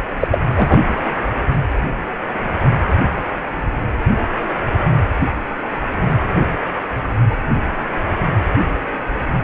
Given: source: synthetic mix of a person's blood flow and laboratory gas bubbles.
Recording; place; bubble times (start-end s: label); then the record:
Doppler ultrasound of blood flow; precordium
0.19-0.28 s: bubbles
0.31-0.39 s: bubbles
0.54-0.80 s: bubbles
From the record:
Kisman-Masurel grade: 213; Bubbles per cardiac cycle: several, 3 to 8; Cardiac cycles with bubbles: 1 to 10%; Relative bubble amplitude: loud (0.450 to 0.775); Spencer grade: 1 (occasional bubble signal discernible with the cardiac motion signal, with majority of cardiac periods free of bubbles); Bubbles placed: anywhere in the cardiac cycle